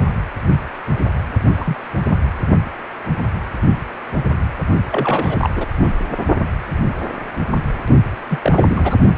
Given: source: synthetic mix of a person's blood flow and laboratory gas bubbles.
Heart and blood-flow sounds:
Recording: Doppler ultrasound of blood flow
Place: precordium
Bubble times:
1.57-1.76 s: bubbles
2.08-2.19 s: bubbles
4.91-5.50 s: bubbles
5.55-5.66 s: bubbles
5.81-5.91 s: bubbles
8.27-8.38 s: bubbles
8.42-8.98 s: bubbles
From the record:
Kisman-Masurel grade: 222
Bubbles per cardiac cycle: several, 3 to 8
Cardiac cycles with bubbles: 10 to 50%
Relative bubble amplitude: moderate (0.250 to 0.450)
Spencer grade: 2 (many but less than half of the cardiac periods contain bubble signals, singularly or in groups)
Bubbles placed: only in the low amplitude regions of the cardiac cycle

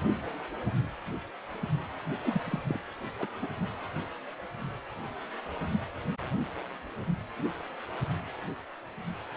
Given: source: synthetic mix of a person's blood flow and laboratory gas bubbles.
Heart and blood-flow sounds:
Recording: Doppler ultrasound of blood flow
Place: precordium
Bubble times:
2.22-2.40 s: bubbles
2.45-2.59 s: bubbles
2.68-2.79 s: bubbles
3.19-3.26 s: bubbles
3.42-3.47 s: bubbles
From the record:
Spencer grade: 2 (many but less than half of the cardiac periods contain bubble signals, singularly or in groups)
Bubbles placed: anywhere in the cardiac cycle

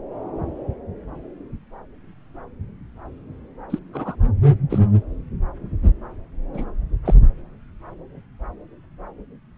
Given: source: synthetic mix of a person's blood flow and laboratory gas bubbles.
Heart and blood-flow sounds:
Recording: Doppler ultrasound of blood flow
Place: subclavian vein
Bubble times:
3.69-3.79 s: bubbles
3.93-4.16 s: bubbles
4.70-4.79 s: bubbles
6.54-6.65 s: bubbles
7.06-7.14 s: bubbles
From the record:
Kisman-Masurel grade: 121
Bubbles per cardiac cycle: 1 to 2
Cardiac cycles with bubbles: 10 to 50%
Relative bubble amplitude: barely perceptible (0.100 to 0.250)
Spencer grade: 2 (many but less than half of the cardiac periods contain bubble signals, singularly or in groups)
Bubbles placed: anywhere in the cardiac cycle

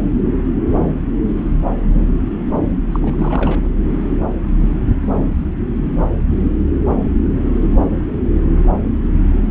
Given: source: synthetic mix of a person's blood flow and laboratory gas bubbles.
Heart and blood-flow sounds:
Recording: Doppler ultrasound of blood flow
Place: subclavian vein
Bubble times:
2.92-3.71 s: bubbles
From the record:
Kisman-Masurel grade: 211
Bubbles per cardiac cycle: several, 3 to 8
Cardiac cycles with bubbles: 1 to 10%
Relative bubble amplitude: barely perceptible (0.100 to 0.250)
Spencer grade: 1 (occasional bubble signal discernible with the cardiac motion signal, with majority of cardiac periods free of bubbles)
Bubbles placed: anywhere in the cardiac cycle

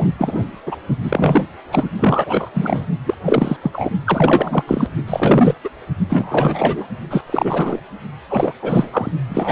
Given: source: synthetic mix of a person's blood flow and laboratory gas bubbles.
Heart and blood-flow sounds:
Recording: Doppler ultrasound of blood flow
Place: precordium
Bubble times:
0.00-0.08 s: bubbles
0.18-0.45 s: bubbles
0.66-0.76 s: bubbles
1.04-1.45 s: bubbles
1.72-1.88 s: bubbles
1.99-2.50 s: bubbles
2.54-2.87 s: bubbles
3.06-3.15 s: bubbles
3.25-3.57 s: bubbles
3.62-3.90 s: bubbles
4.04-4.63 s: bubbles
4.67-4.88 s: bubbles
5.07-5.54 s: bubbles
5.64-5.69 s: bubbles
6.09-6.86 s: bubbles
7.10-7.22 s: bubbles
7.26-7.80 s: bubbles
8.29-8.52 s: bubbles
8.62-8.88 s: bubbles
8.92-9.10 s: bubbles
9.29-9.52 s: bubbles
From the record:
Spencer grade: 3 (all of the cardiac periods contain showers or single bubble signals, but not dominating or overriding the cardiac motion signals)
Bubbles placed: only in the low amplitude regions of the cardiac cycle

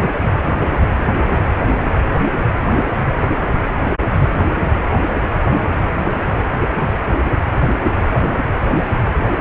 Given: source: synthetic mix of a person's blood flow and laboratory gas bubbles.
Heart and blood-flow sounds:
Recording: Doppler ultrasound of blood flow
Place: precordium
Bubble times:
no bubbles
From the record:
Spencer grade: 0 (complete lack of bubble signals)

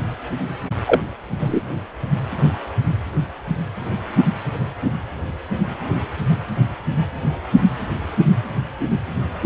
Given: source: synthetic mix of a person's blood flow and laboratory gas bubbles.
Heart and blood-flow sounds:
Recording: Doppler ultrasound of blood flow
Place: precordium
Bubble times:
0.87-1.01 s: bubbles
1.40-1.61 s: bubbles
From the record:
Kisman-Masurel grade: 113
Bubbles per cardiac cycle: 1 to 2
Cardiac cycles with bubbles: 1 to 10%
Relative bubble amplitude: loud (0.450 to 0.775)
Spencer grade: 1 (occasional bubble signal discernible with the cardiac motion signal, with majority of cardiac periods free of bubbles)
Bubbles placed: anywhere in the cardiac cycle

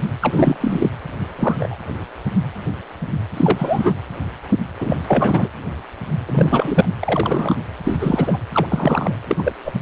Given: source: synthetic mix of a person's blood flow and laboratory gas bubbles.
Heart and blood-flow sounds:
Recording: Doppler ultrasound of blood flow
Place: precordium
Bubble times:
0.21-0.56 s: bubbles
0.60-0.89 s: bubbles
1.38-1.77 s: bubbles
3.33-3.94 s: bubbles
4.79-4.98 s: bubbles
5.07-5.49 s: bubbles
6.26-6.89 s: bubbles
7.00-7.56 s: bubbles
7.84-8.39 s: bubbles
8.53-8.66 s: bubbles
8.69-9.18 s: bubbles
9.28-9.52 s: bubbles
9.64-9.73 s: bubbles
From the record:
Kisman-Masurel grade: 233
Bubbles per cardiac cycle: several, 3 to 8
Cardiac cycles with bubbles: 50 to 99%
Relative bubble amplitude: loud (0.450 to 0.775)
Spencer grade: 3 (all of the cardiac periods contain showers or single bubble signals, but not dominating or overriding the cardiac motion signals)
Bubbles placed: anywhere in the cardiac cycle

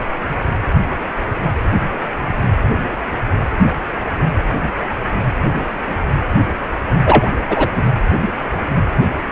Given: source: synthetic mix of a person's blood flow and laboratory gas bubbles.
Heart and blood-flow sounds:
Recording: Doppler ultrasound of blood flow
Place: precordium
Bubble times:
7.06-7.29 s: bubbles
7.49-7.68 s: bubbles
7.75-7.84 s: bubbles
From the record:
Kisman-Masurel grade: 213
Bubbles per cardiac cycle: several, 3 to 8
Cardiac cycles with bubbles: 1 to 10%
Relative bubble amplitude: loud (0.450 to 0.775)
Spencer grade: 1 (occasional bubble signal discernible with the cardiac motion signal, with majority of cardiac periods free of bubbles)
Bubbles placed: anywhere in the cardiac cycle

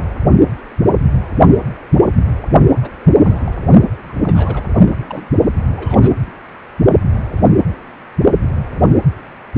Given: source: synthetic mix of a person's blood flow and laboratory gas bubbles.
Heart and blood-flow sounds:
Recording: Doppler ultrasound of blood flow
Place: precordium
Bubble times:
2.82-2.90 s: bubbles
3.19-3.52 s: bubbles
4.10-4.13 s: bubbles
4.23-4.64 s: bubbles
4.76-5.25 s: bubbles
5.77-6.31 s: bubbles
From the record:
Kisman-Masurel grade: 221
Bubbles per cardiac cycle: several, 3 to 8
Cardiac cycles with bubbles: 10 to 50%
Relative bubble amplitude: barely perceptible (0.100 to 0.250)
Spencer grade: 2 (many but less than half of the cardiac periods contain bubble signals, singularly or in groups)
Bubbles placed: only in the low amplitude regions of the cardiac cycle

